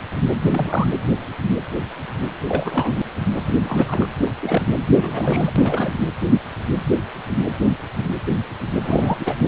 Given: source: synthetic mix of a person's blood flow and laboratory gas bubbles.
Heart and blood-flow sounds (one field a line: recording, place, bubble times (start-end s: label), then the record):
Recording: Doppler ultrasound of blood flow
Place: precordium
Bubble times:
0.41-0.89 s: bubbles
2.48-2.94 s: bubbles
3.31-4.08 s: bubbles
4.26-4.31 s: bubbles
4.42-4.62 s: bubbles
4.86-5.53 s: bubbles
5.55-6.05 s: bubbles
8.81-9.36 s: bubbles
From the record:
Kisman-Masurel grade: 332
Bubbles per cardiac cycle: rolling drumbeat, 9 or more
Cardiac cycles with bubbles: 50 to 99%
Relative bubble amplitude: moderate (0.250 to 0.450)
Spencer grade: 3 (all of the cardiac periods contain showers or single bubble signals, but not dominating or overriding the cardiac motion signals)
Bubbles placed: anywhere in the cardiac cycle